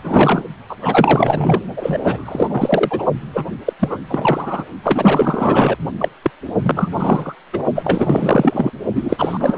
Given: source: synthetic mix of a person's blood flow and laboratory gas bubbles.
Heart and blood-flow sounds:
Doppler ultrasound of blood flow; precordium
0.04-0.43 s: bubbles
0.69-0.76 s: bubbles
0.80-1.62 s: bubbles
1.76-3.05 s: bubbles
3.33-3.45 s: bubbles
3.66-3.73 s: bubbles
3.80-3.98 s: bubbles
4.08-4.65 s: bubbles
4.83-5.76 s: bubbles
5.98-6.08 s: bubbles
6.22-6.30 s: bubbles
6.62-6.88 s: bubbles
6.92-7.35 s: bubbles
7.53-7.63 s: bubbles
7.74-8.71 s: bubbles
8.95-9.58 s: bubbles
From the record:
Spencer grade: 4 (maximum detectable bubble signal sounding continuously throughout systole and diastole of every cardiac period, and overriding the amplitude of the normal cardiac signals); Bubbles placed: only in the low amplitude regions of the cardiac cycle

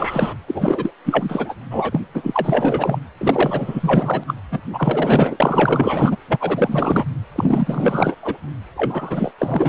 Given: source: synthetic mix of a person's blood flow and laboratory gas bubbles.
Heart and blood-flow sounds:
Doppler ultrasound of blood flow; precordium
0.00-0.34 s: bubbles
0.48-0.93 s: bubbles
1.05-1.55 s: bubbles
1.71-2.00 s: bubbles
2.14-2.99 s: bubbles
3.17-4.23 s: bubbles
4.27-4.34 s: bubbles
4.51-4.60 s: bubbles
4.72-5.37 s: bubbles
5.40-6.17 s: bubbles
6.28-7.05 s: bubbles
7.35-8.15 s: bubbles
8.22-8.38 s: bubbles
8.76-9.31 s: bubbles
9.38-9.69 s: bubbles
From the record:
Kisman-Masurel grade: 444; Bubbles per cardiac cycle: continuous sound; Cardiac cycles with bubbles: 100%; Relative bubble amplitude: maximal (0.775 to 0.999); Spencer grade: 4 (maximum detectable bubble signal sounding continuously throughout systole and diastole of every cardiac period, and overriding the amplitude of the normal cardiac signals); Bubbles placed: anywhere in the cardiac cycle

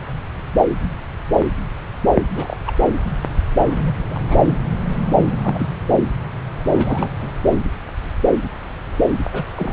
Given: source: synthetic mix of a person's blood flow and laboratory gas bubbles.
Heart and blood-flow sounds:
Doppler ultrasound of blood flow; subclavian vein
2.33-2.56 s: bubbles
2.65-2.74 s: bubbles
3.59-3.94 s: bubbles
4.08-4.56 s: bubbles
5.22-5.67 s: bubbles
6.69-7.13 s: bubbles
7.21-7.29 s: bubbles
9.32-9.45 s: bubbles
9.55-9.73 s: bubbles
From the record:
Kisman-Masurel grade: 232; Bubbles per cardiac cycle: several, 3 to 8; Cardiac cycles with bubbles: 50 to 99%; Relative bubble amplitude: moderate (0.250 to 0.450); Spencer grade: 3 (all of the cardiac periods contain showers or single bubble signals, but not dominating or overriding the cardiac motion signals); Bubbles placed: anywhere in the cardiac cycle

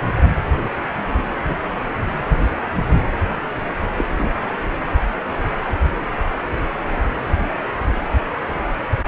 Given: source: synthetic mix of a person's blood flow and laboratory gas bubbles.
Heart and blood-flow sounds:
Doppler ultrasound of blood flow; precordium
1.48-1.56 s: bubbles
3.98-4.06 s: bubbles
4.17-4.29 s: bubbles
From the record:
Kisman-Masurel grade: 122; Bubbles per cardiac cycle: 1 to 2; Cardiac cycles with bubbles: 10 to 50%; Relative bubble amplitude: moderate (0.250 to 0.450); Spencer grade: 2 (many but less than half of the cardiac periods contain bubble signals, singularly or in groups); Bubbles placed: anywhere in the cardiac cycle

